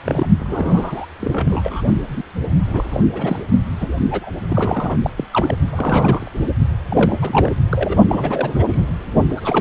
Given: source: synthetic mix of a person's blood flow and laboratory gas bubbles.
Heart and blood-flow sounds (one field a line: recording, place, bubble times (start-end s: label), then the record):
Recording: Doppler ultrasound of blood flow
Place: precordium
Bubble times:
0.05-0.31 s: bubbles
0.39-1.06 s: bubbles
1.19-1.82 s: bubbles
2.08-2.23 s: bubbles
2.66-3.00 s: bubbles
3.13-3.42 s: bubbles
3.81-3.88 s: bubbles
4.10-4.30 s: bubbles
4.49-4.96 s: bubbles
5.03-5.10 s: bubbles
5.17-5.24 s: bubbles
5.31-5.57 s: bubbles
5.72-6.29 s: bubbles
6.88-7.54 s: bubbles
7.70-7.97 s: bubbles
8.09-8.82 s: bubbles
9.29-9.34 s: bubbles
9.37-9.61 s: bubbles
From the record:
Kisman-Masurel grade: 342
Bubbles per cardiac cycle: rolling drumbeat, 9 or more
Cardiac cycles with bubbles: 100%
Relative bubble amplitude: moderate (0.250 to 0.450)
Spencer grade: 3 (all of the cardiac periods contain showers or single bubble signals, but not dominating or overriding the cardiac motion signals)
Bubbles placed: only in the low amplitude regions of the cardiac cycle